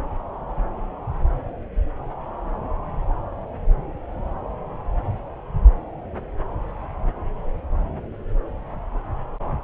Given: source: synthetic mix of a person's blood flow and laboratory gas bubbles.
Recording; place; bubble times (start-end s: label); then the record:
Doppler ultrasound of blood flow; subclavian vein
no bubbles
From the record:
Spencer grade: 0 (complete lack of bubble signals)